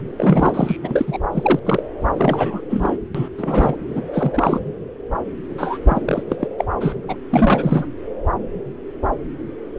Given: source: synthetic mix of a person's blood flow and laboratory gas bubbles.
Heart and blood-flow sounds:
Doppler ultrasound of blood flow; subclavian vein
0.00-0.02 s: bubbles
0.18-0.77 s: bubbles
0.81-1.19 s: bubbles
1.31-1.59 s: bubbles
1.65-1.83 s: bubbles
2.17-2.60 s: bubbles
2.70-2.98 s: bubbles
3.15-3.28 s: bubbles
3.38-3.75 s: bubbles
3.88-4.09 s: bubbles
4.13-4.60 s: bubbles
5.58-5.78 s: bubbles
5.85-6.02 s: bubbles
6.05-6.23 s: bubbles
6.30-6.36 s: bubbles
6.39-6.48 s: bubbles
6.58-6.65 s: bubbles
6.80-6.96 s: bubbles
7.08-7.16 s: bubbles
7.30-7.88 s: bubbles
From the record:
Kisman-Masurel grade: 333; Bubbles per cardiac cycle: rolling drumbeat, 9 or more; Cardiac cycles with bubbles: 50 to 99%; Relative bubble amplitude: loud (0.450 to 0.775); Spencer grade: 3 (all of the cardiac periods contain showers or single bubble signals, but not dominating or overriding the cardiac motion signals); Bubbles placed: anywhere in the cardiac cycle

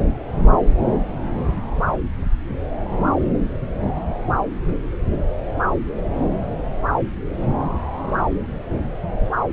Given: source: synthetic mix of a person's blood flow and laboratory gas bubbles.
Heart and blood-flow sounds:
Doppler ultrasound of blood flow; subclavian vein
no bubbles
From the record:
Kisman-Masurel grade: 000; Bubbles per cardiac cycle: 0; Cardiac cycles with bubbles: 0%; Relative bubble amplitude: no bubbles discernible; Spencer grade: 0 (complete lack of bubble signals)

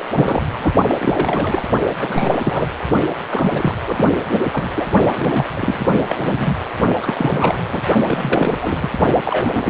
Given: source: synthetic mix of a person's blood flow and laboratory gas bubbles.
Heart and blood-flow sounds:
Doppler ultrasound of blood flow; precordium
0.00-0.05 s: bubbles
0.14-0.73 s: bubbles
0.85-0.95 s: bubbles
0.99-1.62 s: bubbles
2.00-2.71 s: bubbles
3.30-3.74 s: bubbles
3.85-4.04 s: bubbles
4.30-4.43 s: bubbles
4.52-4.71 s: bubbles
4.75-4.85 s: bubbles
5.12-5.45 s: bubbles
5.54-5.85 s: bubbles
5.89-6.02 s: bubbles
6.08-6.58 s: bubbles
7.02-7.62 s: bubbles
7.71-7.81 s: bubbles
8.07-8.58 s: bubbles
8.62-8.90 s: bubbles
9.24-9.70 s: bubbles
From the record:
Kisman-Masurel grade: 342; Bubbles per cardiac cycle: rolling drumbeat, 9 or more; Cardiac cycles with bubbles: 100%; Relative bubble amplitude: moderate (0.250 to 0.450); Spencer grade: 3 (all of the cardiac periods contain showers or single bubble signals, but not dominating or overriding the cardiac motion signals); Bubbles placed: only in the low amplitude regions of the cardiac cycle

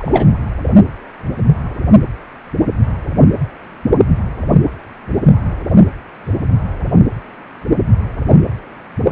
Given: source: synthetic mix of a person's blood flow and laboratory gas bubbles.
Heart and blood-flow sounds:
Doppler ultrasound of blood flow; precordium
0.00-0.26 s: bubbles
From the record:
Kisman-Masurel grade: 213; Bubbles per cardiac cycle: several, 3 to 8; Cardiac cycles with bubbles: 1 to 10%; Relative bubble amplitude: loud (0.450 to 0.775); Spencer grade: 1 (occasional bubble signal discernible with the cardiac motion signal, with majority of cardiac periods free of bubbles); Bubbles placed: anywhere in the cardiac cycle

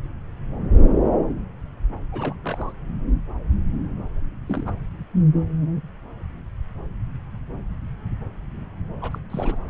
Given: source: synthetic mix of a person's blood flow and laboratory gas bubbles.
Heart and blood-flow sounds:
Doppler ultrasound of blood flow; subclavian vein
2.12-2.34 s: bubbles
2.43-2.72 s: bubbles
4.48-4.74 s: bubbles
9.01-9.18 s: bubbles
9.30-9.70 s: bubbles
From the record:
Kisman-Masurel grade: 221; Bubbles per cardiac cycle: several, 3 to 8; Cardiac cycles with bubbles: 10 to 50%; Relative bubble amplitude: barely perceptible (0.100 to 0.250); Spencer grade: 2 (many but less than half of the cardiac periods contain bubble signals, singularly or in groups); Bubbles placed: anywhere in the cardiac cycle

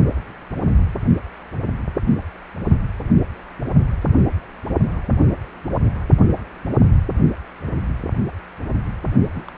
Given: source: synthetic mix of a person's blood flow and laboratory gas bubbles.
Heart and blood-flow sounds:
Doppler ultrasound of blood flow; precordium
9.33-9.45 s: bubbles
9.48-9.55 s: bubbles
From the record:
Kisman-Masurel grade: 211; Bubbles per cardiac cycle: several, 3 to 8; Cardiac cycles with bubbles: 1 to 10%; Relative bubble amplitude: barely perceptible (0.100 to 0.250); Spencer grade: 1 (occasional bubble signal discernible with the cardiac motion signal, with majority of cardiac periods free of bubbles); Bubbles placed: only in the low amplitude regions of the cardiac cycle

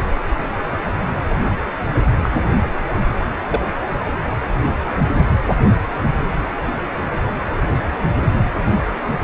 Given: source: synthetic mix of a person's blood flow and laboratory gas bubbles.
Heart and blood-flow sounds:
Doppler ultrasound of blood flow; precordium
2.23-2.29 s: bubbles
3.50-3.61 s: bubbles
From the record:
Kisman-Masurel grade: 122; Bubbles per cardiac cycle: 1 to 2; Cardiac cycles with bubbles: 10 to 50%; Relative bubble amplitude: moderate (0.250 to 0.450); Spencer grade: 2 (many but less than half of the cardiac periods contain bubble signals, singularly or in groups); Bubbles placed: anywhere in the cardiac cycle

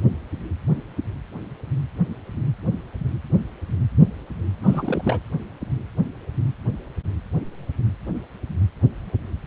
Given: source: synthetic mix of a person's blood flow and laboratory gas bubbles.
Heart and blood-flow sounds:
Doppler ultrasound of blood flow; precordium
4.61-5.20 s: bubbles
From the record:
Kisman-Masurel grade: 211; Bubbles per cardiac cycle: several, 3 to 8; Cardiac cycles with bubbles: 1 to 10%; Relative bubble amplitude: barely perceptible (0.100 to 0.250); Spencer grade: 1 (occasional bubble signal discernible with the cardiac motion signal, with majority of cardiac periods free of bubbles); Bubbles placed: anywhere in the cardiac cycle

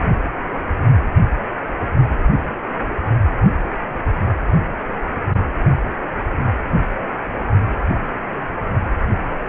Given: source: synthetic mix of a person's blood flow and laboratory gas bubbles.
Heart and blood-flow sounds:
Doppler ultrasound of blood flow; precordium
no bubbles
From the record:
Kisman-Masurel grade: 000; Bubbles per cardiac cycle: 0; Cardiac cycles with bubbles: 0%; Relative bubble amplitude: no bubbles discernible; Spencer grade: 0 (complete lack of bubble signals)

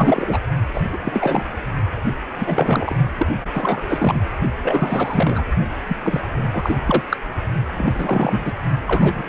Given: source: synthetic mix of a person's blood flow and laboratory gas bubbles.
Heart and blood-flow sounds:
Doppler ultrasound of blood flow; precordium
0.00-0.39 s: bubbles
0.73-0.81 s: bubbles
0.93-0.98 s: bubbles
1.03-1.45 s: bubbles
2.38-2.95 s: bubbles
3.17-3.27 s: bubbles
3.53-4.23 s: bubbles
4.60-5.44 s: bubbles
5.88-5.96 s: bubbles
6.04-6.26 s: bubbles
6.32-6.76 s: bubbles
6.87-7.02 s: bubbles
7.10-7.17 s: bubbles
7.77-8.53 s: bubbles
8.87-9.29 s: bubbles
From the record:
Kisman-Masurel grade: 343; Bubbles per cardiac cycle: rolling drumbeat, 9 or more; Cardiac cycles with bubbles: 100%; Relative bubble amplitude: loud (0.450 to 0.775); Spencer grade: 3 (all of the cardiac periods contain showers or single bubble signals, but not dominating or overriding the cardiac motion signals); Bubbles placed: only in the low amplitude regions of the cardiac cycle

